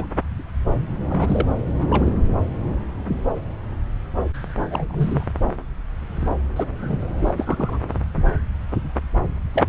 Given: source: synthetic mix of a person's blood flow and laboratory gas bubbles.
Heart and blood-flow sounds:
Doppler ultrasound of blood flow; subclavian vein
0.00-0.06 s: bubbles
1.09-1.46 s: bubbles
1.75-2.13 s: bubbles
4.62-5.25 s: bubbles
6.56-6.66 s: bubbles
6.80-7.00 s: bubbles
7.21-7.78 s: bubbles
9.54-9.67 s: bubbles
From the record:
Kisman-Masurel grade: 232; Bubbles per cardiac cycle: several, 3 to 8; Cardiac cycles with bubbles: 50 to 99%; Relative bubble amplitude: moderate (0.250 to 0.450); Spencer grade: 3 (all of the cardiac periods contain showers or single bubble signals, but not dominating or overriding the cardiac motion signals); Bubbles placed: anywhere in the cardiac cycle

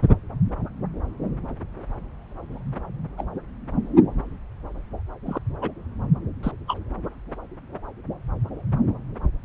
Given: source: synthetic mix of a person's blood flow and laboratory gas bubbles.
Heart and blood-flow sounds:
Doppler ultrasound of blood flow; subclavian vein
3.17-3.24 s: bubbles
5.25-5.39 s: bubbles
5.61-5.71 s: bubbles
6.43-6.51 s: bubbles
6.67-6.78 s: bubbles
From the record:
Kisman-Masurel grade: 122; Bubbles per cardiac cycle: 1 to 2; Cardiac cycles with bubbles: 10 to 50%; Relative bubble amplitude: moderate (0.250 to 0.450); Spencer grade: 2 (many but less than half of the cardiac periods contain bubble signals, singularly or in groups); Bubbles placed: anywhere in the cardiac cycle

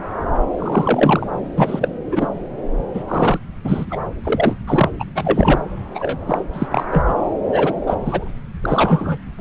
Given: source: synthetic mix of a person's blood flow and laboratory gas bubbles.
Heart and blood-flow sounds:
Doppler ultrasound of blood flow; subclavian vein
0.58-1.27 s: bubbles
1.56-1.89 s: bubbles
2.12-2.29 s: bubbles
2.94-3.04 s: bubbles
3.08-3.39 s: bubbles
3.64-3.85 s: bubbles
3.90-3.98 s: bubbles
4.23-4.55 s: bubbles
4.67-4.89 s: bubbles
4.99-5.04 s: bubbles
5.15-5.65 s: bubbles
5.94-6.40 s: bubbles
6.53-6.67 s: bubbles
6.70-6.84 s: bubbles
6.91-7.03 s: bubbles
7.07-7.14 s: bubbles
7.51-7.74 s: bubbles
7.86-7.94 s: bubbles
8.05-8.29 s: bubbles
8.62-9.19 s: bubbles
From the record:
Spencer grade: 3 (all of the cardiac periods contain showers or single bubble signals, but not dominating or overriding the cardiac motion signals); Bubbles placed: anywhere in the cardiac cycle

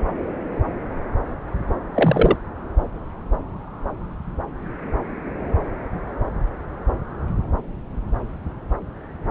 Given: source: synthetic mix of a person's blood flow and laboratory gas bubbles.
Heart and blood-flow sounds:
Doppler ultrasound of blood flow; subclavian vein
1.94-2.36 s: bubbles
From the record:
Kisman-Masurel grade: 213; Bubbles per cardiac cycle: several, 3 to 8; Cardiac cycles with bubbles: 1 to 10%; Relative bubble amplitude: loud (0.450 to 0.775); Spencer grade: 1 (occasional bubble signal discernible with the cardiac motion signal, with majority of cardiac periods free of bubbles); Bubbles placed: anywhere in the cardiac cycle

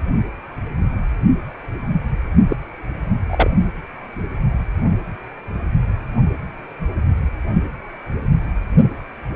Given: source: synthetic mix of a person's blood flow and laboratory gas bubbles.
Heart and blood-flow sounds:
Doppler ultrasound of blood flow; precordium
2.49-2.56 s: bubbles
3.29-3.50 s: bubbles
From the record:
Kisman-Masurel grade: 113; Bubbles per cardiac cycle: 1 to 2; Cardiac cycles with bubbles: 1 to 10%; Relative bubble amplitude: loud (0.450 to 0.775); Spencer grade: 1 (occasional bubble signal discernible with the cardiac motion signal, with majority of cardiac periods free of bubbles); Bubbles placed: only in the low amplitude regions of the cardiac cycle

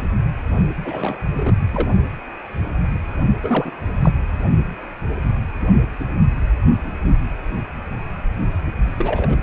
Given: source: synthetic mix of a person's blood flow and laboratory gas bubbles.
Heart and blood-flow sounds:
Doppler ultrasound of blood flow; precordium
0.85-1.23 s: bubbles
1.33-1.54 s: bubbles
1.72-1.90 s: bubbles
3.42-3.71 s: bubbles
4.02-4.11 s: bubbles
8.97-9.38 s: bubbles
From the record:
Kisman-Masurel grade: 221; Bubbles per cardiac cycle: several, 3 to 8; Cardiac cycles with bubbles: 10 to 50%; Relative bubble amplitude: barely perceptible (0.100 to 0.250); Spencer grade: 2 (many but less than half of the cardiac periods contain bubble signals, singularly or in groups); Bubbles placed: only in the low amplitude regions of the cardiac cycle

